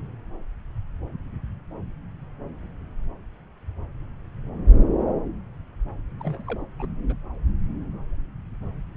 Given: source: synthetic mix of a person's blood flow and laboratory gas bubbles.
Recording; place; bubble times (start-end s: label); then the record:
Doppler ultrasound of blood flow; subclavian vein
6.20-6.43 s: bubbles
6.47-6.64 s: bubbles
6.79-6.86 s: bubbles
7.09-7.13 s: bubbles
From the record:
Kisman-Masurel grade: 211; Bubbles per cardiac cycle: several, 3 to 8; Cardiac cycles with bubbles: 1 to 10%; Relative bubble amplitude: barely perceptible (0.100 to 0.250); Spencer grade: 1 (occasional bubble signal discernible with the cardiac motion signal, with majority of cardiac periods free of bubbles); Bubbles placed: anywhere in the cardiac cycle